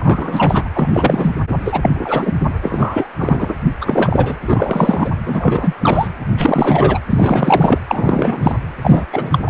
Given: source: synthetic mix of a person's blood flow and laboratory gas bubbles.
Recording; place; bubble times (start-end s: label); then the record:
Doppler ultrasound of blood flow; precordium
0.00-0.68 s: bubbles
0.73-1.34 s: bubbles
1.65-2.33 s: bubbles
2.62-3.10 s: bubbles
3.19-3.54 s: bubbles
3.81-4.33 s: bubbles
4.47-5.10 s: bubbles
5.26-5.73 s: bubbles
5.80-6.08 s: bubbles
6.37-6.98 s: bubbles
7.09-7.79 s: bubbles
7.88-8.56 s: bubbles
8.81-9.05 s: bubbles
9.12-9.38 s: bubbles
9.46-9.50 s: bubbles
From the record:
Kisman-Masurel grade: 343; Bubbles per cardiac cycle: rolling drumbeat, 9 or more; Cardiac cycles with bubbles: 100%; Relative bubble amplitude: loud (0.450 to 0.775); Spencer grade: 3 (all of the cardiac periods contain showers or single bubble signals, but not dominating or overriding the cardiac motion signals); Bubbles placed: anywhere in the cardiac cycle